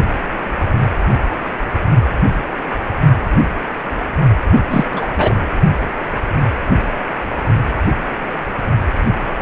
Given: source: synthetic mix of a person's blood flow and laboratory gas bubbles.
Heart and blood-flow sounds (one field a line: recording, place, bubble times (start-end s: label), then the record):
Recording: Doppler ultrasound of blood flow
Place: precordium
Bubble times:
4.52-4.63 s: bubbles
4.71-4.85 s: bubbles
4.92-5.14 s: bubbles
5.18-5.34 s: bubbles
From the record:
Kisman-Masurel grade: 213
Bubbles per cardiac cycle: several, 3 to 8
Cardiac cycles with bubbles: 1 to 10%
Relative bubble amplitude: loud (0.450 to 0.775)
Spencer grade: 1 (occasional bubble signal discernible with the cardiac motion signal, with majority of cardiac periods free of bubbles)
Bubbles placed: only in the low amplitude regions of the cardiac cycle